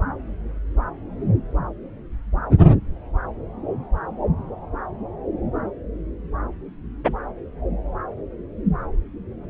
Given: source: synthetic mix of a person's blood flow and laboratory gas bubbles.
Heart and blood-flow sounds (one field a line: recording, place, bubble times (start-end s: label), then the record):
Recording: Doppler ultrasound of blood flow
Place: subclavian vein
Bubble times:
7.04-7.14 s: bubbles
From the record:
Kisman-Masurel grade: 112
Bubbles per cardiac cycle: 1 to 2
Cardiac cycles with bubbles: 1 to 10%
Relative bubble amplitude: moderate (0.250 to 0.450)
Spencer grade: 1 (occasional bubble signal discernible with the cardiac motion signal, with majority of cardiac periods free of bubbles)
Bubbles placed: anywhere in the cardiac cycle